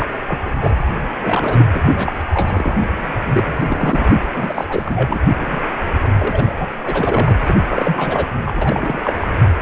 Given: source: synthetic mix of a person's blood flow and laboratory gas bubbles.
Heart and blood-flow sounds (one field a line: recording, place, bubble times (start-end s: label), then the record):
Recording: Doppler ultrasound of blood flow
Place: precordium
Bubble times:
0.00-0.06 s: bubbles
0.28-0.39 s: bubbles
0.45-0.83 s: bubbles
1.23-1.66 s: bubbles
1.73-1.83 s: bubbles
1.86-2.12 s: bubbles
2.30-2.77 s: bubbles
3.33-3.55 s: bubbles
3.58-4.21 s: bubbles
4.34-4.64 s: bubbles
4.68-5.18 s: bubbles
5.36-5.62 s: bubbles
6.01-6.11 s: bubbles
6.19-6.67 s: bubbles
6.84-7.32 s: bubbles
7.39-7.55 s: bubbles
7.59-8.28 s: bubbles
8.46-8.98 s: bubbles
9.04-9.14 s: bubbles
9.20-9.28 s: bubbles
From the record:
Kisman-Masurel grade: 342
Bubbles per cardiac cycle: rolling drumbeat, 9 or more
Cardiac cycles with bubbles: 100%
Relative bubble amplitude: moderate (0.250 to 0.450)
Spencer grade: 3 (all of the cardiac periods contain showers or single bubble signals, but not dominating or overriding the cardiac motion signals)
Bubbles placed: anywhere in the cardiac cycle